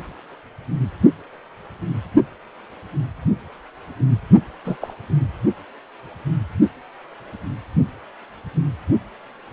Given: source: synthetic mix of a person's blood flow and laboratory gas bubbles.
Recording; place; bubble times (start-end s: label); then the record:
Doppler ultrasound of blood flow; precordium
4.64-4.77 s: bubbles
4.81-4.94 s: bubbles
From the record:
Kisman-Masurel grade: 112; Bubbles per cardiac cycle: 1 to 2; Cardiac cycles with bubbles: 1 to 10%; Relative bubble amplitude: moderate (0.250 to 0.450); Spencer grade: 1 (occasional bubble signal discernible with the cardiac motion signal, with majority of cardiac periods free of bubbles); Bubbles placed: only in the low amplitude regions of the cardiac cycle